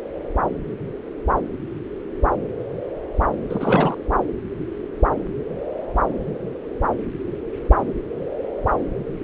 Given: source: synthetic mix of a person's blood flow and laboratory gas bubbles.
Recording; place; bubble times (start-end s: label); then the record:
Doppler ultrasound of blood flow; subclavian vein
3.50-3.94 s: bubbles
From the record:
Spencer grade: 1 (occasional bubble signal discernible with the cardiac motion signal, with majority of cardiac periods free of bubbles); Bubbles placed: anywhere in the cardiac cycle